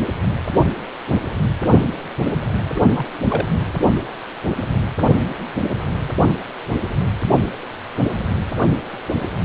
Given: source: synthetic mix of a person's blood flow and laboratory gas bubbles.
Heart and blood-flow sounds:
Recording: Doppler ultrasound of blood flow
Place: precordium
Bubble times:
2.57-2.66 s: bubbles
2.75-2.82 s: bubbles
2.95-3.06 s: bubbles
3.28-3.48 s: bubbles
From the record:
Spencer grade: 2 (many but less than half of the cardiac periods contain bubble signals, singularly or in groups)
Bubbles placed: only in the low amplitude regions of the cardiac cycle

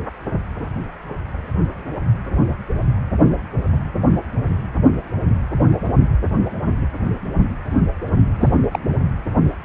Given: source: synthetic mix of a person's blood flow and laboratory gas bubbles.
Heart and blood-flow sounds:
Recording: Doppler ultrasound of blood flow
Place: precordium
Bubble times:
8.40-8.49 s: bubbles
8.71-8.79 s: bubbles
From the record:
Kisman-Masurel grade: 122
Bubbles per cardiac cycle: 1 to 2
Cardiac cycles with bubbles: 10 to 50%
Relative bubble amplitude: moderate (0.250 to 0.450)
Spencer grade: 2 (many but less than half of the cardiac periods contain bubble signals, singularly or in groups)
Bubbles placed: anywhere in the cardiac cycle

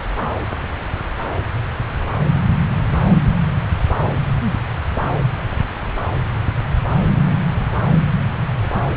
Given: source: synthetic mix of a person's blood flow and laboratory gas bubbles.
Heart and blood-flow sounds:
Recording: Doppler ultrasound of blood flow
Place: subclavian vein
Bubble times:
no bubbles
From the record:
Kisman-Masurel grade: 000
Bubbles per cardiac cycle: 0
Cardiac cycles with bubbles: 0%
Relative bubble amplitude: no bubbles discernible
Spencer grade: 0 (complete lack of bubble signals)

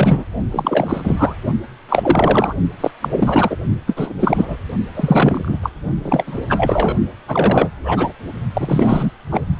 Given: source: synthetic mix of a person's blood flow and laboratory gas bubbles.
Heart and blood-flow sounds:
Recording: Doppler ultrasound of blood flow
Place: precordium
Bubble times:
0.00-0.24 s: bubbles
0.51-1.34 s: bubbles
1.89-2.54 s: bubbles
2.80-2.91 s: bubbles
3.02-3.56 s: bubbles
3.87-4.13 s: bubbles
4.19-4.57 s: bubbles
4.95-5.58 s: bubbles
5.62-5.70 s: bubbles
6.02-6.24 s: bubbles
6.26-6.41 s: bubbles
6.49-6.96 s: bubbles
7.28-7.69 s: bubbles
7.83-8.12 s: bubbles
8.54-9.11 s: bubbles
9.31-9.42 s: bubbles
From the record:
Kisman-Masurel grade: 343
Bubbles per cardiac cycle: rolling drumbeat, 9 or more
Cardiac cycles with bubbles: 100%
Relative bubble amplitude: loud (0.450 to 0.775)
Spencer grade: 3 (all of the cardiac periods contain showers or single bubble signals, but not dominating or overriding the cardiac motion signals)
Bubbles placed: only in the low amplitude regions of the cardiac cycle

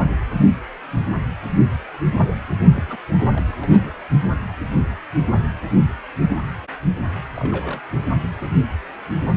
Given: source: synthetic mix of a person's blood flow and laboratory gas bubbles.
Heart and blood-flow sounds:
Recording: Doppler ultrasound of blood flow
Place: precordium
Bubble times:
2.73-2.98 s: bubbles
3.33-3.52 s: bubbles
3.61-3.92 s: bubbles
7.35-7.81 s: bubbles
8.40-8.47 s: bubbles
From the record:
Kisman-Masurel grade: 221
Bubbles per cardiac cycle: several, 3 to 8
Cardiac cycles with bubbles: 10 to 50%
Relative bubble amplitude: barely perceptible (0.100 to 0.250)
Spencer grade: 2 (many but less than half of the cardiac periods contain bubble signals, singularly or in groups)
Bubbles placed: only in the low amplitude regions of the cardiac cycle

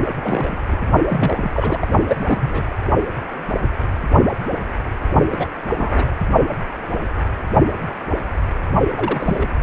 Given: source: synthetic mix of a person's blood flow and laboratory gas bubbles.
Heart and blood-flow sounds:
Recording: Doppler ultrasound of blood flow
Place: precordium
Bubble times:
0.20-0.57 s: bubbles
0.70-0.77 s: bubbles
1.08-1.87 s: bubbles
2.07-2.62 s: bubbles
5.31-5.49 s: bubbles
5.76-6.13 s: bubbles
8.96-9.49 s: bubbles
From the record:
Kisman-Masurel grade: 222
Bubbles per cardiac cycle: several, 3 to 8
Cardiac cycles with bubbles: 10 to 50%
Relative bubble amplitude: moderate (0.250 to 0.450)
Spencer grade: 2 (many but less than half of the cardiac periods contain bubble signals, singularly or in groups)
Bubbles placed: only in the low amplitude regions of the cardiac cycle

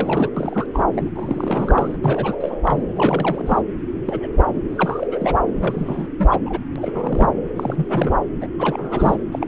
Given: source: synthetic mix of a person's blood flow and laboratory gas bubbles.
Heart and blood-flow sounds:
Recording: Doppler ultrasound of blood flow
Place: subclavian vein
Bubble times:
0.00-0.29 s: bubbles
0.36-0.66 s: bubbles
0.73-0.84 s: bubbles
0.93-1.10 s: bubbles
1.16-1.97 s: bubbles
2.02-2.36 s: bubbles
2.40-2.58 s: bubbles
2.65-2.83 s: bubbles
2.96-3.61 s: bubbles
4.05-4.27 s: bubbles
4.69-5.07 s: bubbles
5.10-5.39 s: bubbles
5.55-6.08 s: bubbles
6.18-6.40 s: bubbles
6.46-6.59 s: bubbles
6.76-7.29 s: bubbles
7.56-8.22 s: bubbles
8.41-8.48 s: bubbles
8.59-9.16 s: bubbles
9.32-9.46 s: bubbles
From the record:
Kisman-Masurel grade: 342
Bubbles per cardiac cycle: rolling drumbeat, 9 or more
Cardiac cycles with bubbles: 100%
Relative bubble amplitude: moderate (0.250 to 0.450)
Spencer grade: 3 (all of the cardiac periods contain showers or single bubble signals, but not dominating or overriding the cardiac motion signals)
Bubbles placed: anywhere in the cardiac cycle

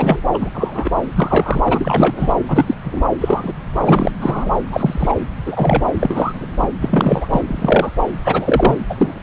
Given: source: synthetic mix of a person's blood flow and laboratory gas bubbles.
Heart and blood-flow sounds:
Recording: Doppler ultrasound of blood flow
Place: subclavian vein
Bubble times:
0.00-0.23 s: bubbles
0.33-0.50 s: bubbles
0.53-0.91 s: bubbles
1.15-1.62 s: bubbles
1.65-2.35 s: bubbles
2.48-2.75 s: bubbles
2.84-3.02 s: bubbles
3.21-3.52 s: bubbles
3.81-4.12 s: bubbles
4.20-4.53 s: bubbles
4.71-5.13 s: bubbles
5.46-5.84 s: bubbles
5.99-6.46 s: bubbles
6.62-6.67 s: bubbles
6.80-7.28 s: bubbles
7.34-7.41 s: bubbles
7.47-7.91 s: bubbles
8.23-8.77 s: bubbles
8.89-9.20 s: bubbles
From the record:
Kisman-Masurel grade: 243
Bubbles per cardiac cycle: several, 3 to 8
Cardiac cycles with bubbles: 100%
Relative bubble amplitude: loud (0.450 to 0.775)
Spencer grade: 3 (all of the cardiac periods contain showers or single bubble signals, but not dominating or overriding the cardiac motion signals)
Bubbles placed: anywhere in the cardiac cycle

